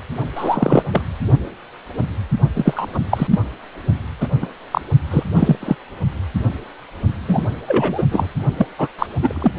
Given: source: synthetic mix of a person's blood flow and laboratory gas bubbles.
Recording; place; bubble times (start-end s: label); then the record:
Doppler ultrasound of blood flow; precordium
0.35-0.83 s: bubbles
0.91-1.02 s: bubbles
2.54-3.01 s: bubbles
3.10-3.27 s: bubbles
3.31-3.39 s: bubbles
4.21-4.28 s: bubbles
4.42-4.46 s: bubbles
4.71-4.81 s: bubbles
5.10-5.23 s: bubbles
5.35-5.55 s: bubbles
5.60-5.75 s: bubbles
7.28-7.47 s: bubbles
7.67-8.04 s: bubbles
8.11-8.27 s: bubbles
8.57-8.66 s: bubbles
8.78-8.88 s: bubbles
8.99-9.07 s: bubbles
9.22-9.53 s: bubbles
From the record:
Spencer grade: 3 (all of the cardiac periods contain showers or single bubble signals, but not dominating or overriding the cardiac motion signals); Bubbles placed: only in the low amplitude regions of the cardiac cycle